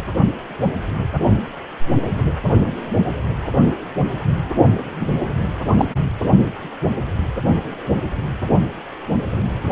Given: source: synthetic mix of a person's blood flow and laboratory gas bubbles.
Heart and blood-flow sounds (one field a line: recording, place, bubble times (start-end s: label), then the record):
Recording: Doppler ultrasound of blood flow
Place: precordium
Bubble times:
5.00-5.09 s: bubbles
5.77-5.86 s: bubbles
From the record:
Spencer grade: 1 (occasional bubble signal discernible with the cardiac motion signal, with majority of cardiac periods free of bubbles)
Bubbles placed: only in the low amplitude regions of the cardiac cycle